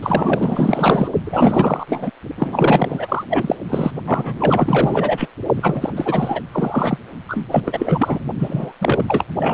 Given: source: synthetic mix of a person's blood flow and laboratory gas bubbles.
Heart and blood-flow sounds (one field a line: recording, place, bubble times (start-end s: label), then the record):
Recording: Doppler ultrasound of blood flow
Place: precordium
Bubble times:
0.02-1.09 s: bubbles
1.24-2.10 s: bubbles
2.37-3.24 s: bubbles
3.29-3.55 s: bubbles
3.69-3.91 s: bubbles
4.06-5.28 s: bubbles
5.55-5.90 s: bubbles
5.96-6.42 s: bubbles
6.51-6.98 s: bubbles
7.28-7.47 s: bubbles
7.51-8.24 s: bubbles
8.38-8.72 s: bubbles
8.80-9.04 s: bubbles
9.07-9.24 s: bubbles
9.38-9.54 s: bubbles
From the record:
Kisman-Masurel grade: 444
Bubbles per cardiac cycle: continuous sound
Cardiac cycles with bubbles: 100%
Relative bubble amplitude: maximal (0.775 to 0.999)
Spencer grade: 4 (maximum detectable bubble signal sounding continuously throughout systole and diastole of every cardiac period, and overriding the amplitude of the normal cardiac signals)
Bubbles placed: only in the low amplitude regions of the cardiac cycle